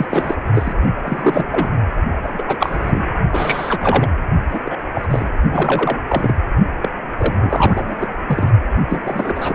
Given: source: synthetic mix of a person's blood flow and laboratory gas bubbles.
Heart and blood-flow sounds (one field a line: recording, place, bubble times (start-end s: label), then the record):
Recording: Doppler ultrasound of blood flow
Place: precordium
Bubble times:
0.00-0.06 s: bubbles
0.09-0.36 s: bubbles
0.54-0.74 s: bubbles
1.03-1.46 s: bubbles
1.51-1.83 s: bubbles
2.23-3.04 s: bubbles
3.32-4.13 s: bubbles
4.50-4.61 s: bubbles
4.65-4.78 s: bubbles
4.95-5.08 s: bubbles
5.11-5.30 s: bubbles
5.52-5.96 s: bubbles
6.08-6.35 s: bubbles
6.82-6.88 s: bubbles
7.17-8.07 s: bubbles
8.28-8.50 s: bubbles
8.78-9.55 s: bubbles
From the record:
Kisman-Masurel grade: 343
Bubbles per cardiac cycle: rolling drumbeat, 9 or more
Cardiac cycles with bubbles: 100%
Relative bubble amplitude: loud (0.450 to 0.775)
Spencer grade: 3 (all of the cardiac periods contain showers or single bubble signals, but not dominating or overriding the cardiac motion signals)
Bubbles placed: only in the low amplitude regions of the cardiac cycle